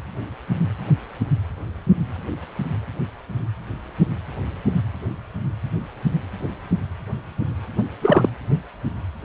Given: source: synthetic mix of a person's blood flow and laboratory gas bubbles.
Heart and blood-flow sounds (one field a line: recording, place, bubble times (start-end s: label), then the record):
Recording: Doppler ultrasound of blood flow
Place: precordium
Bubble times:
7.77-7.84 s: bubbles
8.02-8.29 s: bubbles
From the record:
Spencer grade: 1 (occasional bubble signal discernible with the cardiac motion signal, with majority of cardiac periods free of bubbles)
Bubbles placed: anywhere in the cardiac cycle